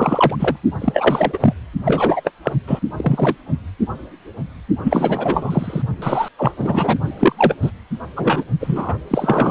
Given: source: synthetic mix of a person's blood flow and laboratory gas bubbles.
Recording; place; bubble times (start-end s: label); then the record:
Doppler ultrasound of blood flow; precordium
0.00-0.35 s: bubbles
0.39-0.56 s: bubbles
0.80-1.54 s: bubbles
1.84-2.21 s: bubbles
2.24-2.30 s: bubbles
2.43-2.53 s: bubbles
2.67-2.79 s: bubbles
2.96-3.35 s: bubbles
4.83-5.82 s: bubbles
6.02-6.29 s: bubbles
6.38-6.51 s: bubbles
6.58-6.98 s: bubbles
7.04-7.55 s: bubbles
7.61-7.71 s: bubbles
8.16-8.44 s: bubbles
8.60-8.94 s: bubbles
9.10-9.50 s: bubbles
From the record:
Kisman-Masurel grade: 333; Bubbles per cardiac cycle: rolling drumbeat, 9 or more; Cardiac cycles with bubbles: 50 to 99%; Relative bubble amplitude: loud (0.450 to 0.775); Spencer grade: 3 (all of the cardiac periods contain showers or single bubble signals, but not dominating or overriding the cardiac motion signals); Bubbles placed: only in the low amplitude regions of the cardiac cycle